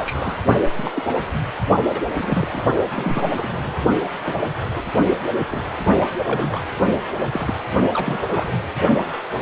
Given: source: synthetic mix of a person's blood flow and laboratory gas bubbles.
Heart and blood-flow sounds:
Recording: Doppler ultrasound of blood flow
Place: precordium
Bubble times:
0.00-0.36 s: bubbles
0.77-0.92 s: bubbles
0.94-1.27 s: bubbles
1.88-2.00 s: bubbles
2.10-2.60 s: bubbles
2.90-3.26 s: bubbles
3.36-3.74 s: bubbles
4.17-4.50 s: bubbles
4.73-4.85 s: bubbles
5.05-5.17 s: bubbles
5.51-5.62 s: bubbles
6.25-6.61 s: bubbles
7.32-7.54 s: bubbles
7.93-8.22 s: bubbles
8.27-8.59 s: bubbles
From the record:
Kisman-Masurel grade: 242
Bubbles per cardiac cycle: several, 3 to 8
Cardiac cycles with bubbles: 100%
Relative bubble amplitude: moderate (0.250 to 0.450)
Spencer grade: 3 (all of the cardiac periods contain showers or single bubble signals, but not dominating or overriding the cardiac motion signals)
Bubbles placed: only in the low amplitude regions of the cardiac cycle

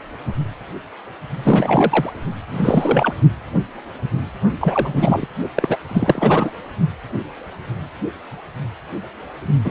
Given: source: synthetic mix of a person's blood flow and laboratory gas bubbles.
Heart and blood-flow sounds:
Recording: Doppler ultrasound of blood flow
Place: precordium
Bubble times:
1.44-2.10 s: bubbles
2.51-3.13 s: bubbles
4.60-5.26 s: bubbles
5.55-5.77 s: bubbles
5.88-6.52 s: bubbles
9.64-9.71 s: bubbles
From the record:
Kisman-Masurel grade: 333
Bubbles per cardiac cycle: rolling drumbeat, 9 or more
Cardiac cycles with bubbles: 50 to 99%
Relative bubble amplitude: loud (0.450 to 0.775)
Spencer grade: 3 (all of the cardiac periods contain showers or single bubble signals, but not dominating or overriding the cardiac motion signals)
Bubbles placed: only in the low amplitude regions of the cardiac cycle

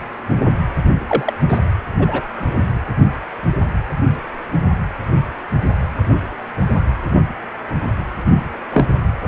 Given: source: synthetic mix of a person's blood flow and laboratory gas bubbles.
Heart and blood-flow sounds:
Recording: Doppler ultrasound of blood flow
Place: precordium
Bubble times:
1.06-1.33 s: bubbles
1.49-1.59 s: bubbles
1.99-2.21 s: bubbles
2.54-2.62 s: bubbles
8.72-8.85 s: bubbles
From the record:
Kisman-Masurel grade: 123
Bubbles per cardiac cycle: 1 to 2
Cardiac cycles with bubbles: 10 to 50%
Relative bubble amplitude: loud (0.450 to 0.775)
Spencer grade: 2 (many but less than half of the cardiac periods contain bubble signals, singularly or in groups)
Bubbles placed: anywhere in the cardiac cycle

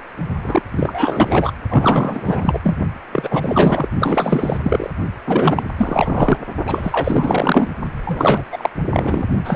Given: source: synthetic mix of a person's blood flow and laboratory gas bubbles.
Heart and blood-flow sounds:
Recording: Doppler ultrasound of blood flow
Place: precordium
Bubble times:
0.42-0.62 s: bubbles
0.71-1.51 s: bubbles
1.69-2.60 s: bubbles
2.63-2.77 s: bubbles
3.12-3.89 s: bubbles
3.99-4.59 s: bubbles
4.63-4.90 s: bubbles
5.27-5.65 s: bubbles
5.77-6.38 s: bubbles
6.66-7.69 s: bubbles
8.06-8.44 s: bubbles
8.52-8.70 s: bubbles
8.93-9.26 s: bubbles
9.44-9.56 s: bubbles
From the record:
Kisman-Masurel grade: 444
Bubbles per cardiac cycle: continuous sound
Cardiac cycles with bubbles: 100%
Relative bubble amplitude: maximal (0.775 to 0.999)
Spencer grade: 4 (maximum detectable bubble signal sounding continuously throughout systole and diastole of every cardiac period, and overriding the amplitude of the normal cardiac signals)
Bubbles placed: only in the low amplitude regions of the cardiac cycle

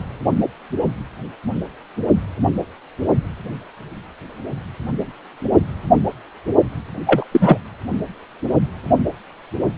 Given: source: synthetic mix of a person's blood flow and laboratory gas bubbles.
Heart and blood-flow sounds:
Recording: Doppler ultrasound of blood flow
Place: precordium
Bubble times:
7.05-7.24 s: bubbles
7.31-7.57 s: bubbles
From the record:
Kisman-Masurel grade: 213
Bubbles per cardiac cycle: several, 3 to 8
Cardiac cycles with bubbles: 1 to 10%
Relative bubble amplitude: loud (0.450 to 0.775)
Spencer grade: 1 (occasional bubble signal discernible with the cardiac motion signal, with majority of cardiac periods free of bubbles)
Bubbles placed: only in the low amplitude regions of the cardiac cycle

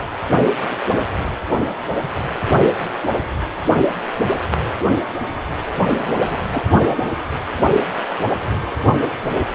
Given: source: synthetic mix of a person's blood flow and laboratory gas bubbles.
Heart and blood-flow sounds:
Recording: Doppler ultrasound of blood flow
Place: precordium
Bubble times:
5.91-6.39 s: bubbles
6.50-6.64 s: bubbles
From the record:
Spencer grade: 1 (occasional bubble signal discernible with the cardiac motion signal, with majority of cardiac periods free of bubbles)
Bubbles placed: only in the low amplitude regions of the cardiac cycle

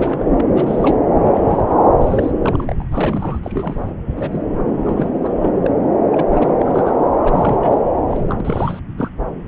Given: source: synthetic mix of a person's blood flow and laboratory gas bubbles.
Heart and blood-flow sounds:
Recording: Doppler ultrasound of blood flow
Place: subclavian vein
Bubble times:
0.00-0.46 s: bubbles
0.53-0.98 s: bubbles
1.24-1.64 s: bubbles
1.67-1.76 s: bubbles
2.00-2.31 s: bubbles
2.42-2.85 s: bubbles
2.91-3.40 s: bubbles
3.43-3.92 s: bubbles
4.17-4.43 s: bubbles
4.75-5.09 s: bubbles
5.14-5.32 s: bubbles
5.42-5.52 s: bubbles
5.62-5.70 s: bubbles
6.11-6.53 s: bubbles
6.59-7.08 s: bubbles
7.23-7.81 s: bubbles
8.07-8.36 s: bubbles
8.40-8.79 s: bubbles
8.97-9.10 s: bubbles
From the record:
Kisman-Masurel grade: 242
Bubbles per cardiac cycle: several, 3 to 8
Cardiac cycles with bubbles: 100%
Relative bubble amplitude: moderate (0.250 to 0.450)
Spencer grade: 3 (all of the cardiac periods contain showers or single bubble signals, but not dominating or overriding the cardiac motion signals)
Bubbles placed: anywhere in the cardiac cycle

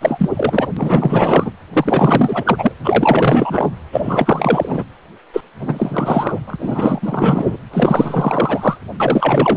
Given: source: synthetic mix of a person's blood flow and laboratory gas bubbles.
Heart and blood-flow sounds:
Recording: Doppler ultrasound of blood flow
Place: precordium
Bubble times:
0.00-0.29 s: bubbles
0.33-0.68 s: bubbles
0.76-1.51 s: bubbles
1.73-2.71 s: bubbles
2.83-3.71 s: bubbles
3.92-4.83 s: bubbles
5.33-5.41 s: bubbles
5.60-6.38 s: bubbles
6.47-6.56 s: bubbles
6.58-7.56 s: bubbles
7.73-8.79 s: bubbles
9.00-9.57 s: bubbles
From the record:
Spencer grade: 4 (maximum detectable bubble signal sounding continuously throughout systole and diastole of every cardiac period, and overriding the amplitude of the normal cardiac signals)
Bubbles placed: anywhere in the cardiac cycle

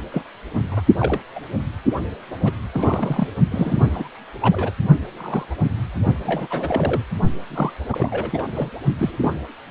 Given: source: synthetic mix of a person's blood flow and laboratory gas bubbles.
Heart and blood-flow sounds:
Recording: Doppler ultrasound of blood flow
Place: precordium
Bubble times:
0.11-0.22 s: bubbles
0.69-0.84 s: bubbles
1.00-1.22 s: bubbles
1.35-1.40 s: bubbles
2.44-2.52 s: bubbles
2.72-3.27 s: bubbles
3.51-4.08 s: bubbles
4.42-4.72 s: bubbles
5.17-5.45 s: bubbles
5.62-5.71 s: bubbles
6.23-7.01 s: bubbles
7.50-7.71 s: bubbles
7.92-8.46 s: bubbles
8.52-8.70 s: bubbles
8.99-9.44 s: bubbles
From the record:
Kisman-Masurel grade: 232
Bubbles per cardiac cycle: several, 3 to 8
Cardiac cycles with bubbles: 50 to 99%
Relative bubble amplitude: moderate (0.250 to 0.450)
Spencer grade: 3 (all of the cardiac periods contain showers or single bubble signals, but not dominating or overriding the cardiac motion signals)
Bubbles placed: only in the low amplitude regions of the cardiac cycle

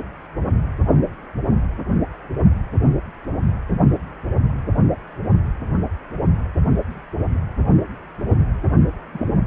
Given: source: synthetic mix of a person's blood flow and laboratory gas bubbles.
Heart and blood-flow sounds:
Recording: Doppler ultrasound of blood flow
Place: precordium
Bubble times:
9.12-9.26 s: bubbles
From the record:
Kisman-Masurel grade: 111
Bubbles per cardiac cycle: 1 to 2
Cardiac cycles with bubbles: 1 to 10%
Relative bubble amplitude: barely perceptible (0.100 to 0.250)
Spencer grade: 1 (occasional bubble signal discernible with the cardiac motion signal, with majority of cardiac periods free of bubbles)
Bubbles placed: anywhere in the cardiac cycle

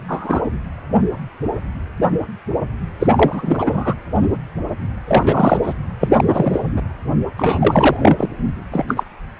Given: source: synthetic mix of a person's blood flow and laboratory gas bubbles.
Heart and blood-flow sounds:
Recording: Doppler ultrasound of blood flow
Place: precordium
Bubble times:
0.08-0.41 s: bubbles
0.44-0.49 s: bubbles
2.99-3.07 s: bubbles
3.10-3.95 s: bubbles
5.07-5.59 s: bubbles
5.63-5.73 s: bubbles
6.00-6.09 s: bubbles
6.17-6.60 s: bubbles
6.76-6.82 s: bubbles
7.38-7.96 s: bubbles
8.00-8.25 s: bubbles
8.71-8.85 s: bubbles
8.88-9.04 s: bubbles
From the record:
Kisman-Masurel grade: 233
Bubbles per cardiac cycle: several, 3 to 8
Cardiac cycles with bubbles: 50 to 99%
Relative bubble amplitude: loud (0.450 to 0.775)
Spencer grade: 3 (all of the cardiac periods contain showers or single bubble signals, but not dominating or overriding the cardiac motion signals)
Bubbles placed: anywhere in the cardiac cycle

